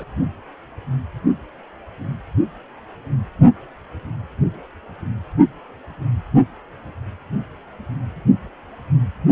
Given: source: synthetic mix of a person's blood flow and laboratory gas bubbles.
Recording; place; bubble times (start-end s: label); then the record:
Doppler ultrasound of blood flow; precordium
0.00-0.04 s: bubbles
From the record:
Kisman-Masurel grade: 211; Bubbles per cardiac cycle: several, 3 to 8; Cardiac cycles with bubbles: 1 to 10%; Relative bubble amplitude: barely perceptible (0.100 to 0.250); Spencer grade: 1 (occasional bubble signal discernible with the cardiac motion signal, with majority of cardiac periods free of bubbles); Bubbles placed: only in the low amplitude regions of the cardiac cycle